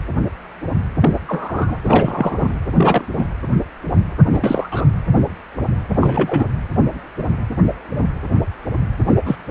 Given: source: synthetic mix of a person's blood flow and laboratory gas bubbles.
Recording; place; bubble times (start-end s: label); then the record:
Doppler ultrasound of blood flow; precordium
1.01-1.10 s: bubbles
1.28-1.78 s: bubbles
1.84-2.54 s: bubbles
2.77-3.05 s: bubbles
3.17-3.26 s: bubbles
4.28-4.87 s: bubbles
6.00-6.45 s: bubbles
9.07-9.15 s: bubbles
9.25-9.35 s: bubbles
From the record:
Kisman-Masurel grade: 233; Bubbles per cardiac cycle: several, 3 to 8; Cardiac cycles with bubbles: 50 to 99%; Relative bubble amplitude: loud (0.450 to 0.775); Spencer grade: 3 (all of the cardiac periods contain showers or single bubble signals, but not dominating or overriding the cardiac motion signals); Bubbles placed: anywhere in the cardiac cycle